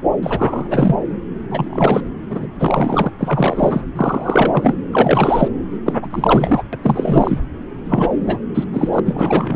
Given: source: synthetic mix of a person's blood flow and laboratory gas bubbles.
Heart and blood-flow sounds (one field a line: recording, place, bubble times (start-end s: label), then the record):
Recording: Doppler ultrasound of blood flow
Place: subclavian vein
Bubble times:
0.23-0.96 s: bubbles
1.50-2.02 s: bubbles
2.29-2.47 s: bubbles
2.59-3.10 s: bubbles
3.20-3.82 s: bubbles
3.96-4.77 s: bubbles
4.92-5.48 s: bubbles
5.85-5.94 s: bubbles
6.02-6.07 s: bubbles
6.11-6.63 s: bubbles
6.72-6.78 s: bubbles
6.82-7.38 s: bubbles
7.85-8.38 s: bubbles
8.54-8.64 s: bubbles
8.72-8.89 s: bubbles
8.93-8.99 s: bubbles
9.05-9.56 s: bubbles
From the record:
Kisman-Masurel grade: 343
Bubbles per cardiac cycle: rolling drumbeat, 9 or more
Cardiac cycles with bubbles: 100%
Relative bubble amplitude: loud (0.450 to 0.775)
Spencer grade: 3 (all of the cardiac periods contain showers or single bubble signals, but not dominating or overriding the cardiac motion signals)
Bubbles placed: anywhere in the cardiac cycle